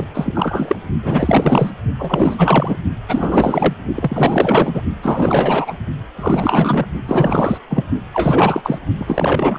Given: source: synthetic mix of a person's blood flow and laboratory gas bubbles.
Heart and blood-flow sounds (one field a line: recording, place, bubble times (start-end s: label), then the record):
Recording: Doppler ultrasound of blood flow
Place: precordium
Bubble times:
0.00-0.06 s: bubbles
0.14-0.75 s: bubbles
1.02-1.71 s: bubbles
1.99-2.77 s: bubbles
3.08-3.73 s: bubbles
3.94-4.81 s: bubbles
5.02-5.74 s: bubbles
6.15-6.86 s: bubbles
7.05-7.57 s: bubbles
7.70-7.84 s: bubbles
8.13-8.79 s: bubbles
8.98-9.59 s: bubbles
From the record:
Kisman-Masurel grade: 444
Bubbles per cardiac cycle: continuous sound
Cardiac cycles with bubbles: 100%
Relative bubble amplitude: maximal (0.775 to 0.999)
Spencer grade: 4 (maximum detectable bubble signal sounding continuously throughout systole and diastole of every cardiac period, and overriding the amplitude of the normal cardiac signals)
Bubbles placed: only in the low amplitude regions of the cardiac cycle